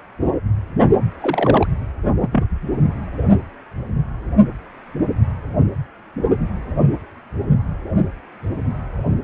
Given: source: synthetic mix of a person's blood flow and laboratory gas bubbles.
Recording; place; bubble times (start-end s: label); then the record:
Doppler ultrasound of blood flow; precordium
1.21-1.67 s: bubbles
2.21-2.45 s: bubbles
From the record:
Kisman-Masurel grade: 122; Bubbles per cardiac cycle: 1 to 2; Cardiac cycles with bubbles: 10 to 50%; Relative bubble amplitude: moderate (0.250 to 0.450); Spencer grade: 2 (many but less than half of the cardiac periods contain bubble signals, singularly or in groups); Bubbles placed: anywhere in the cardiac cycle